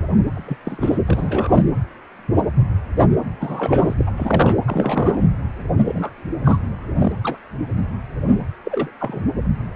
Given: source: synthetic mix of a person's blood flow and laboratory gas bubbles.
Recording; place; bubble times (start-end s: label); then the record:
Doppler ultrasound of blood flow; precordium
0.35-0.56 s: bubbles
0.65-0.99 s: bubbles
1.06-1.62 s: bubbles
3.40-3.95 s: bubbles
3.97-4.12 s: bubbles
4.17-4.58 s: bubbles
4.67-5.22 s: bubbles
5.85-6.11 s: bubbles
6.44-6.59 s: bubbles
6.94-7.12 s: bubbles
7.22-7.38 s: bubbles
8.65-8.91 s: bubbles
9.00-9.22 s: bubbles
From the record:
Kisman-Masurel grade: 232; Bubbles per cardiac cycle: several, 3 to 8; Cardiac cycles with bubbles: 50 to 99%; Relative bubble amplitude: moderate (0.250 to 0.450); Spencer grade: 3 (all of the cardiac periods contain showers or single bubble signals, but not dominating or overriding the cardiac motion signals); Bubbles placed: anywhere in the cardiac cycle